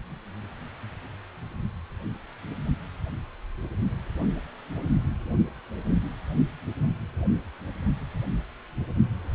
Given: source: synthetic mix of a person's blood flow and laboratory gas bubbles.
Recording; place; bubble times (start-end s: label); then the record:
Doppler ultrasound of blood flow; precordium
no bubbles
From the record:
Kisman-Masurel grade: 000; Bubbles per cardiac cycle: 0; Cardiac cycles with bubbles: 0%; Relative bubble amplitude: no bubbles discernible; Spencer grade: 0 (complete lack of bubble signals)